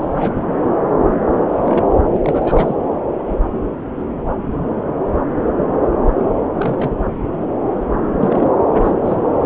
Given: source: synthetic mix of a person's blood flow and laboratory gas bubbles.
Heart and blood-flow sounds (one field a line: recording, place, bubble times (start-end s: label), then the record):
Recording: Doppler ultrasound of blood flow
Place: subclavian vein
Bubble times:
0.00-0.43 s: bubbles
1.50-1.98 s: bubbles
2.13-2.76 s: bubbles
6.18-6.29 s: bubbles
6.52-6.97 s: bubbles
8.19-8.49 s: bubbles
8.74-8.91 s: bubbles
9.04-9.17 s: bubbles
9.31-9.46 s: bubbles
From the record:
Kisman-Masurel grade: 221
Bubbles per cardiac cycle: several, 3 to 8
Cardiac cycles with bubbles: 10 to 50%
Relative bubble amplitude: barely perceptible (0.100 to 0.250)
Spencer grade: 2 (many but less than half of the cardiac periods contain bubble signals, singularly or in groups)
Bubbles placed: anywhere in the cardiac cycle